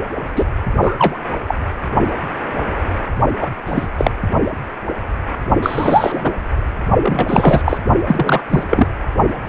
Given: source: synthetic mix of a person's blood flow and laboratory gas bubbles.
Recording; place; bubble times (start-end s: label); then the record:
Doppler ultrasound of blood flow; precordium
0.35-0.45 s: bubbles
0.82-0.96 s: bubbles
0.98-1.19 s: bubbles
1.47-1.55 s: bubbles
3.41-3.47 s: bubbles
3.66-3.87 s: bubbles
3.98-4.11 s: bubbles
5.62-6.37 s: bubbles
7.02-7.63 s: bubbles
7.66-7.78 s: bubbles
8.07-8.43 s: bubbles
8.49-8.63 s: bubbles
8.69-8.87 s: bubbles
From the record:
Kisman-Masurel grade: 233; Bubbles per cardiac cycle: several, 3 to 8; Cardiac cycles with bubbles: 50 to 99%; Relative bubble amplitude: loud (0.450 to 0.775); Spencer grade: 3 (all of the cardiac periods contain showers or single bubble signals, but not dominating or overriding the cardiac motion signals); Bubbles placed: only in the low amplitude regions of the cardiac cycle